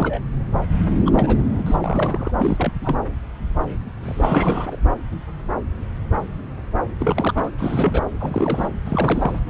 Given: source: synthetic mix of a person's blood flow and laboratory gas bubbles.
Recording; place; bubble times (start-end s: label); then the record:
Doppler ultrasound of blood flow; subclavian vein
0.00-0.22 s: bubbles
1.05-1.43 s: bubbles
1.52-1.63 s: bubbles
1.66-2.31 s: bubbles
2.38-2.73 s: bubbles
2.81-2.98 s: bubbles
4.03-4.77 s: bubbles
6.99-7.50 s: bubbles
7.57-8.01 s: bubbles
8.20-8.69 s: bubbles
8.85-9.41 s: bubbles
From the record:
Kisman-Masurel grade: 332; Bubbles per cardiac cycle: rolling drumbeat, 9 or more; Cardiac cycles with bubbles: 50 to 99%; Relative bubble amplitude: moderate (0.250 to 0.450); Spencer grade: 3 (all of the cardiac periods contain showers or single bubble signals, but not dominating or overriding the cardiac motion signals); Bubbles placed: anywhere in the cardiac cycle